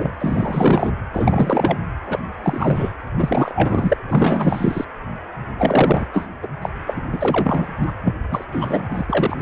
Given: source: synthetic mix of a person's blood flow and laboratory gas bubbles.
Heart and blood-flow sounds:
Doppler ultrasound of blood flow; precordium
0.00-0.11 s: bubbles
0.19-0.91 s: bubbles
1.13-1.78 s: bubbles
2.06-2.19 s: bubbles
2.43-2.92 s: bubbles
3.17-3.96 s: bubbles
4.08-4.85 s: bubbles
5.58-6.07 s: bubbles
6.13-6.27 s: bubbles
6.42-6.47 s: bubbles
6.62-6.69 s: bubbles
6.87-7.02 s: bubbles
7.12-7.74 s: bubbles
7.82-7.85 s: bubbles
7.87-7.92 s: bubbles
8.04-8.14 s: bubbles
8.30-8.45 s: bubbles
8.52-8.83 s: bubbles
8.90-9.42 s: bubbles
From the record:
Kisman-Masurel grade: 343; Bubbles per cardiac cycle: rolling drumbeat, 9 or more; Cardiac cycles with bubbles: 100%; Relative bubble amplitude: loud (0.450 to 0.775); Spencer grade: 3 (all of the cardiac periods contain showers or single bubble signals, but not dominating or overriding the cardiac motion signals); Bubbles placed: anywhere in the cardiac cycle

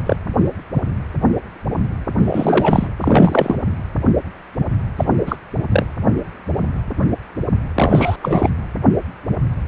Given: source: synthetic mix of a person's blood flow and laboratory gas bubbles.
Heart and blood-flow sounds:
Doppler ultrasound of blood flow; precordium
0.06-0.17 s: bubbles
2.18-2.87 s: bubbles
3.01-3.56 s: bubbles
4.96-5.05 s: bubbles
5.26-5.36 s: bubbles
5.70-5.86 s: bubbles
7.75-8.16 s: bubbles
8.22-8.50 s: bubbles
From the record:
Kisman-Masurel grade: 223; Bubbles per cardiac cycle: several, 3 to 8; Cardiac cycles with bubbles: 10 to 50%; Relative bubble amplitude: loud (0.450 to 0.775); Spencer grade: 2 (many but less than half of the cardiac periods contain bubble signals, singularly or in groups); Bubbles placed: anywhere in the cardiac cycle

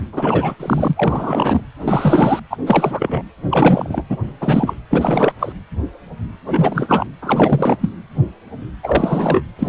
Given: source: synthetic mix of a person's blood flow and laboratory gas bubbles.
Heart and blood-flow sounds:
Doppler ultrasound of blood flow; precordium
0.12-0.54 s: bubbles
0.59-1.61 s: bubbles
1.80-2.40 s: bubbles
2.50-2.57 s: bubbles
2.66-3.23 s: bubbles
3.50-4.03 s: bubbles
4.09-4.17 s: bubbles
4.40-4.74 s: bubbles
4.91-5.31 s: bubbles
5.39-5.52 s: bubbles
6.47-7.06 s: bubbles
7.21-7.76 s: bubbles
7.81-7.91 s: bubbles
8.83-9.42 s: bubbles
9.59-9.69 s: bubbles
From the record:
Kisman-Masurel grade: 333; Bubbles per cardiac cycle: rolling drumbeat, 9 or more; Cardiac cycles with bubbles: 50 to 99%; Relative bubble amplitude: loud (0.450 to 0.775); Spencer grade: 3 (all of the cardiac periods contain showers or single bubble signals, but not dominating or overriding the cardiac motion signals); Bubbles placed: anywhere in the cardiac cycle

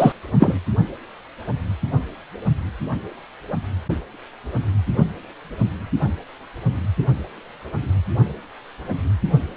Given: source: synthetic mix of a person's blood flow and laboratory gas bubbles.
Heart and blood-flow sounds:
Doppler ultrasound of blood flow; precordium
0.00-0.12 s: bubbles
0.39-0.59 s: bubbles
From the record:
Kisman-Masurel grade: 213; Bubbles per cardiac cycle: several, 3 to 8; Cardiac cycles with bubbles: 1 to 10%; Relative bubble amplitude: loud (0.450 to 0.775); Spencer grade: 1 (occasional bubble signal discernible with the cardiac motion signal, with majority of cardiac periods free of bubbles); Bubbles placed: only in the low amplitude regions of the cardiac cycle

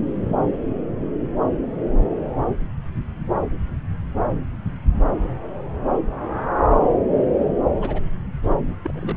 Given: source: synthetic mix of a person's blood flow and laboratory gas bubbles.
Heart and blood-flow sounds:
Doppler ultrasound of blood flow; subclavian vein
7.81-8.01 s: bubbles
8.84-9.16 s: bubbles
From the record:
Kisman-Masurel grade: 122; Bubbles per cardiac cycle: 1 to 2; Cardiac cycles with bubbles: 10 to 50%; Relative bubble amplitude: moderate (0.250 to 0.450); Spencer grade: 2 (many but less than half of the cardiac periods contain bubble signals, singularly or in groups); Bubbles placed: anywhere in the cardiac cycle

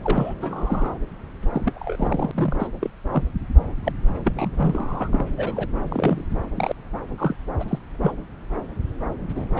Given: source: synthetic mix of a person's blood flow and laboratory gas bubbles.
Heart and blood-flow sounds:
Doppler ultrasound of blood flow; subclavian vein
0.03-0.34 s: bubbles
0.42-0.97 s: bubbles
1.42-1.48 s: bubbles
1.53-2.31 s: bubbles
2.34-2.68 s: bubbles
2.81-2.90 s: bubbles
3.11-3.22 s: bubbles
3.83-3.92 s: bubbles
4.25-5.08 s: bubbles
5.10-5.25 s: bubbles
5.36-5.67 s: bubbles
5.90-6.22 s: bubbles
6.54-6.72 s: bubbles
7.17-7.35 s: bubbles
7.59-7.64 s: bubbles
7.68-7.79 s: bubbles
8.02-8.12 s: bubbles
9.36-9.45 s: bubbles
9.54-9.60 s: bubbles
From the record:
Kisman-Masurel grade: 242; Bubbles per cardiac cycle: several, 3 to 8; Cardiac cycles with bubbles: 100%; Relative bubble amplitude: moderate (0.250 to 0.450); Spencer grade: 3 (all of the cardiac periods contain showers or single bubble signals, but not dominating or overriding the cardiac motion signals); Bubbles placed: anywhere in the cardiac cycle

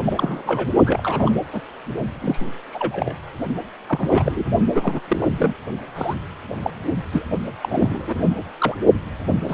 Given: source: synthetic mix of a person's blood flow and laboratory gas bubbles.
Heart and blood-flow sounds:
Doppler ultrasound of blood flow; precordium
0.04-0.69 s: bubbles
0.86-1.38 s: bubbles
1.52-1.60 s: bubbles
2.21-2.50 s: bubbles
2.72-3.17 s: bubbles
3.88-4.44 s: bubbles
4.74-5.00 s: bubbles
5.08-5.54 s: bubbles
5.96-6.15 s: bubbles
6.62-6.71 s: bubbles
7.12-7.27 s: bubbles
7.61-8.37 s: bubbles
8.60-8.75 s: bubbles
9.44-9.54 s: bubbles
From the record:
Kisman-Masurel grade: 242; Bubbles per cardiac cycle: several, 3 to 8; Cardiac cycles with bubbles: 100%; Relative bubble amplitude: moderate (0.250 to 0.450); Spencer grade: 3 (all of the cardiac periods contain showers or single bubble signals, but not dominating or overriding the cardiac motion signals); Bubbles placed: only in the low amplitude regions of the cardiac cycle

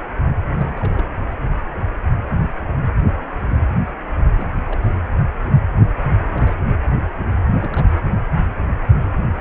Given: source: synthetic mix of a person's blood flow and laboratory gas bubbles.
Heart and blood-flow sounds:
Doppler ultrasound of blood flow; precordium
0.52-1.07 s: bubbles
4.36-4.49 s: bubbles
4.56-4.61 s: bubbles
4.68-4.80 s: bubbles
4.82-4.94 s: bubbles
6.35-6.55 s: bubbles
6.66-6.74 s: bubbles
7.58-7.98 s: bubbles
From the record:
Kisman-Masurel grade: 221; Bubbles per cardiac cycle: several, 3 to 8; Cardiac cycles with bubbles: 10 to 50%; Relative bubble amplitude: barely perceptible (0.100 to 0.250); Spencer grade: 2 (many but less than half of the cardiac periods contain bubble signals, singularly or in groups); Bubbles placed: anywhere in the cardiac cycle

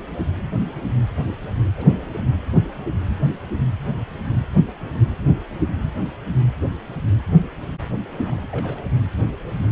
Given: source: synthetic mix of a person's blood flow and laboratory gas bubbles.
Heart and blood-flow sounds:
Doppler ultrasound of blood flow; precordium
1.77-2.23 s: bubbles
8.24-8.49 s: bubbles
8.52-8.82 s: bubbles
8.85-8.91 s: bubbles
9.27-9.33 s: bubbles
From the record:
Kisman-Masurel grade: 221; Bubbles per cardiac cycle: several, 3 to 8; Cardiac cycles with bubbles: 10 to 50%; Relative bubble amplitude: barely perceptible (0.100 to 0.250); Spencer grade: 2 (many but less than half of the cardiac periods contain bubble signals, singularly or in groups); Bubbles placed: anywhere in the cardiac cycle

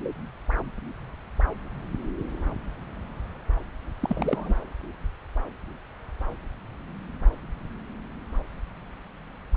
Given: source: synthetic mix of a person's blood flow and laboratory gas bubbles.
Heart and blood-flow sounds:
Doppler ultrasound of blood flow; subclavian vein
4.01-4.54 s: bubbles
From the record:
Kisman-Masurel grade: 111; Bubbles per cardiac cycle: 1 to 2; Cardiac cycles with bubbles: 1 to 10%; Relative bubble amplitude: barely perceptible (0.100 to 0.250); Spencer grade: 1 (occasional bubble signal discernible with the cardiac motion signal, with majority of cardiac periods free of bubbles); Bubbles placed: anywhere in the cardiac cycle

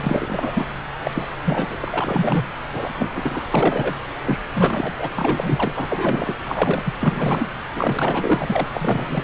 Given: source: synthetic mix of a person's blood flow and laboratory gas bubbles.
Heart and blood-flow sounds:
Doppler ultrasound of blood flow; subclavian vein
0.00-0.65 s: bubbles
1.04-1.11 s: bubbles
1.14-1.26 s: bubbles
1.45-1.77 s: bubbles
1.80-2.47 s: bubbles
2.73-3.44 s: bubbles
3.54-3.94 s: bubbles
4.25-4.40 s: bubbles
4.54-4.93 s: bubbles
4.97-5.13 s: bubbles
5.15-5.72 s: bubbles
5.75-6.34 s: bubbles
6.45-6.94 s: bubbles
7.01-7.48 s: bubbles
7.75-8.67 s: bubbles
8.71-9.24 s: bubbles
From the record:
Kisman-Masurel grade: 343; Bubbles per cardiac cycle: rolling drumbeat, 9 or more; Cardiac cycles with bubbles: 100%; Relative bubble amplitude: loud (0.450 to 0.775); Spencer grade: 3 (all of the cardiac periods contain showers or single bubble signals, but not dominating or overriding the cardiac motion signals); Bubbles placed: anywhere in the cardiac cycle

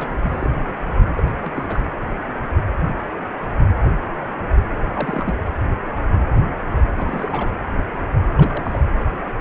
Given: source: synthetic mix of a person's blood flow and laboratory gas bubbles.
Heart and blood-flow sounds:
Doppler ultrasound of blood flow; precordium
0.00-0.14 s: bubbles
0.22-0.51 s: bubbles
1.16-1.23 s: bubbles
1.26-1.51 s: bubbles
1.54-1.85 s: bubbles
4.75-4.86 s: bubbles
4.93-5.34 s: bubbles
6.96-7.51 s: bubbles
8.37-8.80 s: bubbles
From the record:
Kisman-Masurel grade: 221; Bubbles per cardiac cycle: several, 3 to 8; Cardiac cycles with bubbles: 10 to 50%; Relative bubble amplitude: barely perceptible (0.100 to 0.250); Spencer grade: 2 (many but less than half of the cardiac periods contain bubble signals, singularly or in groups); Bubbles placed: anywhere in the cardiac cycle

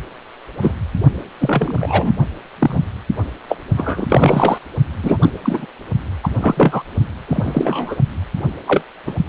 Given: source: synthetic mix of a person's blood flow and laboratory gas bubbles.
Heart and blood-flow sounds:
Doppler ultrasound of blood flow; precordium
0.62-0.71 s: bubbles
1.40-2.12 s: bubbles
2.59-2.83 s: bubbles
3.48-3.56 s: bubbles
3.76-4.58 s: bubbles
5.03-5.19 s: bubbles
5.21-5.30 s: bubbles
5.42-5.67 s: bubbles
6.23-6.29 s: bubbles
6.41-6.83 s: bubbles
7.27-7.96 s: bubbles
8.67-8.82 s: bubbles
9.06-9.14 s: bubbles
9.18-9.24 s: bubbles
From the record:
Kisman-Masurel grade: 243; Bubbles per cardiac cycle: several, 3 to 8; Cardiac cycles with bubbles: 100%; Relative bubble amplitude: loud (0.450 to 0.775); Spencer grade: 3 (all of the cardiac periods contain showers or single bubble signals, but not dominating or overriding the cardiac motion signals); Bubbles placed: only in the low amplitude regions of the cardiac cycle

